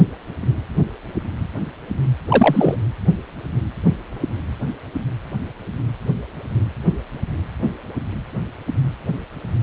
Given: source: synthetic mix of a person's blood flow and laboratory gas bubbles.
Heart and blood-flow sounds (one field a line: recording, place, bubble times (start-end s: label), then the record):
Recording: Doppler ultrasound of blood flow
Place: precordium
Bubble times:
2.29-2.76 s: bubbles
From the record:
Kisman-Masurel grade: 223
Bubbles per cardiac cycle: several, 3 to 8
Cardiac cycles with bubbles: 10 to 50%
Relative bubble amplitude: loud (0.450 to 0.775)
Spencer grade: 2 (many but less than half of the cardiac periods contain bubble signals, singularly or in groups)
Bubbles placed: anywhere in the cardiac cycle